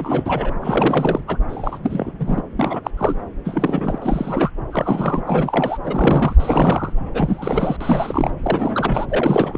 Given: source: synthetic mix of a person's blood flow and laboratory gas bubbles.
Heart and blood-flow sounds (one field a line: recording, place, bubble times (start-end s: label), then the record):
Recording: Doppler ultrasound of blood flow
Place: subclavian vein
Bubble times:
0.00-0.54 s: bubbles
0.61-1.21 s: bubbles
1.27-1.38 s: bubbles
1.49-1.78 s: bubbles
1.83-2.12 s: bubbles
2.20-2.42 s: bubbles
2.57-2.80 s: bubbles
2.85-2.91 s: bubbles
2.98-3.18 s: bubbles
3.45-4.51 s: bubbles
4.71-5.23 s: bubbles
5.26-5.78 s: bubbles
5.84-6.35 s: bubbles
6.39-6.92 s: bubbles
7.13-7.77 s: bubbles
7.80-8.32 s: bubbles
8.43-9.06 s: bubbles
9.09-9.57 s: bubbles
From the record:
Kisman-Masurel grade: 342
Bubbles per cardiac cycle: rolling drumbeat, 9 or more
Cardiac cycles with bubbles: 100%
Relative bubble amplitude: moderate (0.250 to 0.450)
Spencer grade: 3 (all of the cardiac periods contain showers or single bubble signals, but not dominating or overriding the cardiac motion signals)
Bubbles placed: anywhere in the cardiac cycle